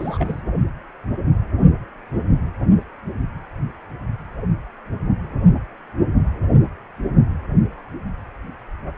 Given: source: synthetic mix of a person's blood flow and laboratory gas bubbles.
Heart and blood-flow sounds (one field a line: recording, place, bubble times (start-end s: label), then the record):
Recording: Doppler ultrasound of blood flow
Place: precordium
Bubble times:
0.00-0.40 s: bubbles
From the record:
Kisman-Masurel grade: 221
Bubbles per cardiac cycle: several, 3 to 8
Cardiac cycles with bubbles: 10 to 50%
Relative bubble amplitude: barely perceptible (0.100 to 0.250)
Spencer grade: 2 (many but less than half of the cardiac periods contain bubble signals, singularly or in groups)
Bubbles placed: only in the low amplitude regions of the cardiac cycle